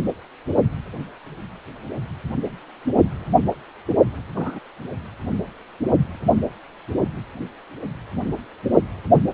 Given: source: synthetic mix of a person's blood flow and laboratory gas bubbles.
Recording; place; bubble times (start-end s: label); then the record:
Doppler ultrasound of blood flow; precordium
4.36-4.59 s: bubbles
From the record:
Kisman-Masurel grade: 112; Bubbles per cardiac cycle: 1 to 2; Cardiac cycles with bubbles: 1 to 10%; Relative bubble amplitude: moderate (0.250 to 0.450); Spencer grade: 1 (occasional bubble signal discernible with the cardiac motion signal, with majority of cardiac periods free of bubbles); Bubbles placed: only in the low amplitude regions of the cardiac cycle